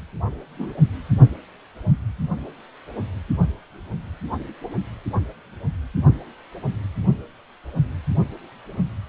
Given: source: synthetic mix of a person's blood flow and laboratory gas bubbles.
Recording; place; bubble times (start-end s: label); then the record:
Doppler ultrasound of blood flow; precordium
0.58-0.73 s: bubbles
From the record:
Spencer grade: 1 (occasional bubble signal discernible with the cardiac motion signal, with majority of cardiac periods free of bubbles); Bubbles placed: anywhere in the cardiac cycle